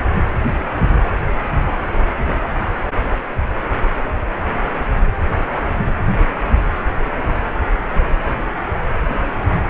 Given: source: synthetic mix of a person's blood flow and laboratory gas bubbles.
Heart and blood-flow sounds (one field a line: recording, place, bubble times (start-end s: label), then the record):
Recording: Doppler ultrasound of blood flow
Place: precordium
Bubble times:
no bubbles
From the record:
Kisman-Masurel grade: 000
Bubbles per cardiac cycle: 0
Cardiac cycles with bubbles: 0%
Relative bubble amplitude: no bubbles discernible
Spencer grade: 0 (complete lack of bubble signals)